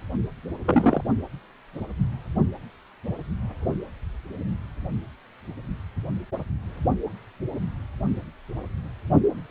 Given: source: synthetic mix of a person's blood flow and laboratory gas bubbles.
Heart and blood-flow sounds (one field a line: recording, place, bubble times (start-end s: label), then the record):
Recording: Doppler ultrasound of blood flow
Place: precordium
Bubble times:
0.65-1.01 s: bubbles
From the record:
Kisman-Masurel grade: 113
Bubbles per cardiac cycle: 1 to 2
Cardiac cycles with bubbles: 1 to 10%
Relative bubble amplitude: loud (0.450 to 0.775)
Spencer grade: 1 (occasional bubble signal discernible with the cardiac motion signal, with majority of cardiac periods free of bubbles)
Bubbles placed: only in the low amplitude regions of the cardiac cycle